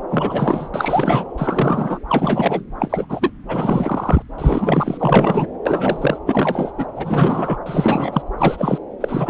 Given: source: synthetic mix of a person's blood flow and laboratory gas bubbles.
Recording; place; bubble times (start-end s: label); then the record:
Doppler ultrasound of blood flow; subclavian vein
0.10-0.68 s: bubbles
0.74-1.28 s: bubbles
1.38-1.99 s: bubbles
2.09-2.62 s: bubbles
2.80-3.06 s: bubbles
3.09-3.30 s: bubbles
3.48-4.22 s: bubbles
4.38-5.46 s: bubbles
5.65-6.19 s: bubbles
6.26-6.71 s: bubbles
6.77-6.86 s: bubbles
6.96-7.58 s: bubbles
7.66-8.22 s: bubbles
8.38-8.78 s: bubbles
9.00-9.30 s: bubbles
From the record:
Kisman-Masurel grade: 342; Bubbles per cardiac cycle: rolling drumbeat, 9 or more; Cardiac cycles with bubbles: 100%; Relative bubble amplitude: moderate (0.250 to 0.450); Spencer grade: 3 (all of the cardiac periods contain showers or single bubble signals, but not dominating or overriding the cardiac motion signals); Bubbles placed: anywhere in the cardiac cycle